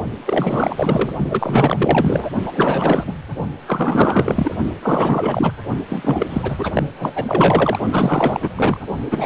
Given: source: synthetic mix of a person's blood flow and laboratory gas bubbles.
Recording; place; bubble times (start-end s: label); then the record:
Doppler ultrasound of blood flow; precordium
0.25-1.10 s: bubbles
1.30-2.30 s: bubbles
2.43-2.52 s: bubbles
2.55-3.13 s: bubbles
3.67-4.55 s: bubbles
4.82-5.54 s: bubbles
5.89-6.26 s: bubbles
6.29-6.83 s: bubbles
6.97-7.79 s: bubbles
7.91-8.50 s: bubbles
8.55-8.80 s: bubbles
9.11-9.25 s: bubbles
From the record:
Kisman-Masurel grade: 444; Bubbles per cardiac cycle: continuous sound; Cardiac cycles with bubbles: 100%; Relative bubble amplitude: maximal (0.775 to 0.999); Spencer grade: 4 (maximum detectable bubble signal sounding continuously throughout systole and diastole of every cardiac period, and overriding the amplitude of the normal cardiac signals); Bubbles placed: only in the low amplitude regions of the cardiac cycle